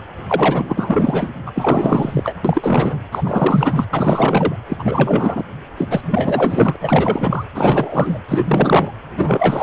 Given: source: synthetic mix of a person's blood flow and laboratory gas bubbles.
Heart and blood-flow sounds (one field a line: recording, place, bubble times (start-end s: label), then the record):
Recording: Doppler ultrasound of blood flow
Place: precordium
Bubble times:
0.28-1.30 s: bubbles
1.46-1.52 s: bubbles
1.55-2.36 s: bubbles
2.45-2.96 s: bubbles
3.12-3.84 s: bubbles
3.93-4.56 s: bubbles
4.68-5.44 s: bubbles
5.77-5.85 s: bubbles
5.90-6.76 s: bubbles
6.80-7.45 s: bubbles
7.54-8.19 s: bubbles
8.29-8.93 s: bubbles
9.17-9.63 s: bubbles
From the record:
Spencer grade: 4 (maximum detectable bubble signal sounding continuously throughout systole and diastole of every cardiac period, and overriding the amplitude of the normal cardiac signals)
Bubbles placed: anywhere in the cardiac cycle